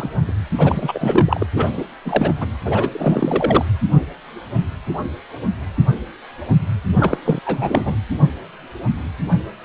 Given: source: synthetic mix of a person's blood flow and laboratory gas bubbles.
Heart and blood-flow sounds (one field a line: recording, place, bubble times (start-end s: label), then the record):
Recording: Doppler ultrasound of blood flow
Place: precordium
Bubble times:
0.00-0.33 s: bubbles
0.57-1.47 s: bubbles
1.55-1.83 s: bubbles
2.05-2.47 s: bubbles
2.65-3.65 s: bubbles
7.00-7.18 s: bubbles
7.24-7.39 s: bubbles
7.45-7.96 s: bubbles
From the record:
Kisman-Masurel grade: 333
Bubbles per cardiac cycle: rolling drumbeat, 9 or more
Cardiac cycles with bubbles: 50 to 99%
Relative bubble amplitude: loud (0.450 to 0.775)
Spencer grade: 3 (all of the cardiac periods contain showers or single bubble signals, but not dominating or overriding the cardiac motion signals)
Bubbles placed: anywhere in the cardiac cycle